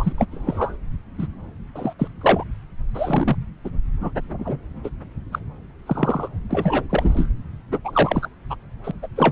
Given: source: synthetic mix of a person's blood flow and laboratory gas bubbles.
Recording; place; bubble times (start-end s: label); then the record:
Doppler ultrasound of blood flow; subclavian vein
0.00-0.12 s: bubbles
0.17-0.26 s: bubbles
0.32-0.76 s: bubbles
1.19-1.27 s: bubbles
1.75-1.93 s: bubbles
1.99-2.07 s: bubbles
2.21-2.44 s: bubbles
2.94-3.37 s: bubbles
3.64-3.69 s: bubbles
4.00-4.10 s: bubbles
4.39-4.57 s: bubbles
4.83-4.90 s: bubbles
5.32-5.39 s: bubbles
5.87-6.28 s: bubbles
6.51-6.83 s: bubbles
6.90-7.29 s: bubbles
7.72-7.79 s: bubbles
7.84-8.29 s: bubbles
8.50-8.55 s: bubbles
8.83-8.91 s: bubbles
9.03-9.07 s: bubbles
9.16-9.32 s: bubbles
From the record:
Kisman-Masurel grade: 242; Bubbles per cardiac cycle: several, 3 to 8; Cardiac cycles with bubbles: 100%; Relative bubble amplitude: moderate (0.250 to 0.450); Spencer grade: 3 (all of the cardiac periods contain showers or single bubble signals, but not dominating or overriding the cardiac motion signals); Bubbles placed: anywhere in the cardiac cycle